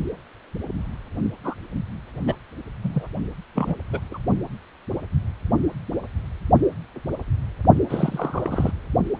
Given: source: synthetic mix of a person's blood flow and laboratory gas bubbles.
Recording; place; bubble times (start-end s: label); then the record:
Doppler ultrasound of blood flow; precordium
1.44-1.54 s: bubbles
2.27-2.34 s: bubbles
2.83-3.07 s: bubbles
3.54-3.75 s: bubbles
3.92-4.00 s: bubbles
4.11-4.18 s: bubbles
7.88-8.71 s: bubbles
From the record:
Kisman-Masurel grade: 222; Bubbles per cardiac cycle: several, 3 to 8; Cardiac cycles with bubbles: 10 to 50%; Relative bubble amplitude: moderate (0.250 to 0.450); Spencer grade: 2 (many but less than half of the cardiac periods contain bubble signals, singularly or in groups); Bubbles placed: only in the low amplitude regions of the cardiac cycle